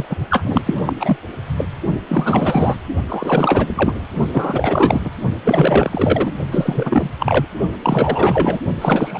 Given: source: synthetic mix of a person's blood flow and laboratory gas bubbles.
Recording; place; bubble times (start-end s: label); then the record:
Doppler ultrasound of blood flow; precordium
0.00-0.05 s: bubbles
0.09-0.16 s: bubbles
0.29-0.62 s: bubbles
0.66-0.74 s: bubbles
0.85-0.93 s: bubbles
0.99-1.17 s: bubbles
1.56-1.65 s: bubbles
2.04-2.76 s: bubbles
3.08-4.09 s: bubbles
4.32-5.01 s: bubbles
5.04-5.11 s: bubbles
5.44-6.32 s: bubbles
6.51-7.10 s: bubbles
7.19-7.46 s: bubbles
7.82-8.61 s: bubbles
8.81-9.20 s: bubbles
From the record:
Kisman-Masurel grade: 444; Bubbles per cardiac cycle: continuous sound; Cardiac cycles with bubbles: 100%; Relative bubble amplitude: maximal (0.775 to 0.999); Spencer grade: 4 (maximum detectable bubble signal sounding continuously throughout systole and diastole of every cardiac period, and overriding the amplitude of the normal cardiac signals); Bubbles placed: only in the low amplitude regions of the cardiac cycle